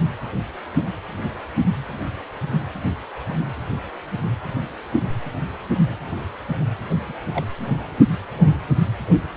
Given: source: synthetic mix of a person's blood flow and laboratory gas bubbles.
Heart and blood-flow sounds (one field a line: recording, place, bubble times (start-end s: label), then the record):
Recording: Doppler ultrasound of blood flow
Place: precordium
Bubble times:
6.89-6.94 s: bubbles
7.08-7.13 s: bubbles
7.32-7.44 s: bubbles
From the record:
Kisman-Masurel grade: 211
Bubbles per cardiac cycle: several, 3 to 8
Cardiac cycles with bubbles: 1 to 10%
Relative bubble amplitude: barely perceptible (0.100 to 0.250)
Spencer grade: 1 (occasional bubble signal discernible with the cardiac motion signal, with majority of cardiac periods free of bubbles)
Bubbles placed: anywhere in the cardiac cycle